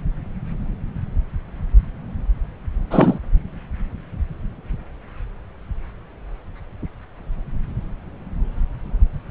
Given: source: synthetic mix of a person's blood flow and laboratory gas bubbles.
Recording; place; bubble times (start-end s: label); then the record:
Doppler ultrasound of blood flow; subclavian vein
2.90-3.19 s: bubbles
From the record:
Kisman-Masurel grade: 213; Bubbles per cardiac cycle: several, 3 to 8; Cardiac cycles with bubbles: 1 to 10%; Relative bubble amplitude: loud (0.450 to 0.775); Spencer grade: 1 (occasional bubble signal discernible with the cardiac motion signal, with majority of cardiac periods free of bubbles); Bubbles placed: anywhere in the cardiac cycle